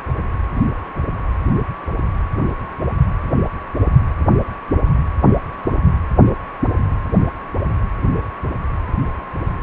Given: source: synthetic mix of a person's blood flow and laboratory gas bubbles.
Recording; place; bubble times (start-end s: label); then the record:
Doppler ultrasound of blood flow; precordium
no bubbles
From the record:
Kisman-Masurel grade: 000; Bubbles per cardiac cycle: 0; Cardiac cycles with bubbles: 0%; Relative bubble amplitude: no bubbles discernible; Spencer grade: 0 (complete lack of bubble signals)